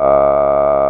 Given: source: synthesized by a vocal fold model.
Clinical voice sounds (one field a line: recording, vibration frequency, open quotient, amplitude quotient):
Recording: sustained vowel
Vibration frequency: 70 Hz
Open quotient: 0.1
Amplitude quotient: 1